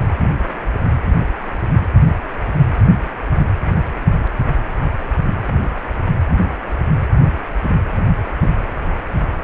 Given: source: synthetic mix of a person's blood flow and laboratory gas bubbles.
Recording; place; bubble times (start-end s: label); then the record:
Doppler ultrasound of blood flow; precordium
8.42-8.54 s: bubbles
From the record:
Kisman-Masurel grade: 112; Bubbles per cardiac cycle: 1 to 2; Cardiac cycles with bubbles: 1 to 10%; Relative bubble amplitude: moderate (0.250 to 0.450); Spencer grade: 1 (occasional bubble signal discernible with the cardiac motion signal, with majority of cardiac periods free of bubbles); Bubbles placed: anywhere in the cardiac cycle